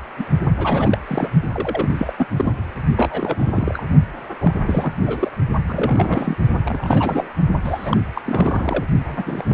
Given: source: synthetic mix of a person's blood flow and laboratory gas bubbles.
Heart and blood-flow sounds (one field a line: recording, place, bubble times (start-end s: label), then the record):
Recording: Doppler ultrasound of blood flow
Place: precordium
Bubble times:
0.17-0.26 s: bubbles
0.57-0.99 s: bubbles
1.07-1.30 s: bubbles
1.43-1.93 s: bubbles
1.97-2.13 s: bubbles
2.17-2.27 s: bubbles
2.36-2.52 s: bubbles
2.96-3.83 s: bubbles
4.40-4.54 s: bubbles
4.67-4.93 s: bubbles
5.06-5.30 s: bubbles
5.67-6.35 s: bubbles
6.66-7.29 s: bubbles
7.64-7.97 s: bubbles
8.14-8.21 s: bubbles
8.25-8.84 s: bubbles
9.08-9.23 s: bubbles
9.26-9.45 s: bubbles
9.48-9.54 s: bubbles
From the record:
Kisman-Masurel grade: 342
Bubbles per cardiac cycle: rolling drumbeat, 9 or more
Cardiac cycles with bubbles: 100%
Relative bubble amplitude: moderate (0.250 to 0.450)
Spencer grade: 3 (all of the cardiac periods contain showers or single bubble signals, but not dominating or overriding the cardiac motion signals)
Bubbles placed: only in the low amplitude regions of the cardiac cycle